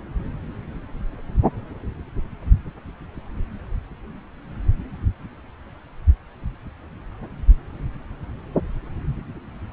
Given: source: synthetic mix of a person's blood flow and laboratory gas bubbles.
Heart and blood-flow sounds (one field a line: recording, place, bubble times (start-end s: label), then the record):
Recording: Doppler ultrasound of blood flow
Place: subclavian vein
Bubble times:
no bubbles
From the record:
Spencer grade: 0 (complete lack of bubble signals)